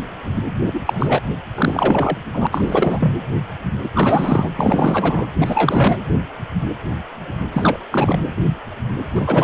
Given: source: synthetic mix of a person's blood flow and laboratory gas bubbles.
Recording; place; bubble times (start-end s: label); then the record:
Doppler ultrasound of blood flow; precordium
0.66-0.80 s: bubbles
0.85-1.22 s: bubbles
1.55-2.17 s: bubbles
2.34-2.47 s: bubbles
2.51-3.10 s: bubbles
3.83-3.90 s: bubbles
3.94-4.50 s: bubbles
4.56-5.25 s: bubbles
5.41-5.97 s: bubbles
7.53-7.79 s: bubbles
7.91-8.26 s: bubbles
9.14-9.44 s: bubbles
From the record:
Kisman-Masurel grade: 333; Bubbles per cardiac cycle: rolling drumbeat, 9 or more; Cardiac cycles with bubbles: 50 to 99%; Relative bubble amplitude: loud (0.450 to 0.775); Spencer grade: 3 (all of the cardiac periods contain showers or single bubble signals, but not dominating or overriding the cardiac motion signals); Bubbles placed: anywhere in the cardiac cycle